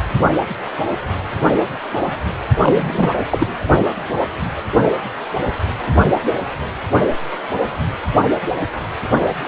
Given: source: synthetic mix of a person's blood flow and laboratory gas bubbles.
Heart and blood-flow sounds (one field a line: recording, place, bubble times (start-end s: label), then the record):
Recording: Doppler ultrasound of blood flow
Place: precordium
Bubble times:
2.61-3.11 s: bubbles
3.31-3.47 s: bubbles
From the record:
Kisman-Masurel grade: 213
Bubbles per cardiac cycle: several, 3 to 8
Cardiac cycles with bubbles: 1 to 10%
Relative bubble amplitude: loud (0.450 to 0.775)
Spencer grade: 1 (occasional bubble signal discernible with the cardiac motion signal, with majority of cardiac periods free of bubbles)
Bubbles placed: anywhere in the cardiac cycle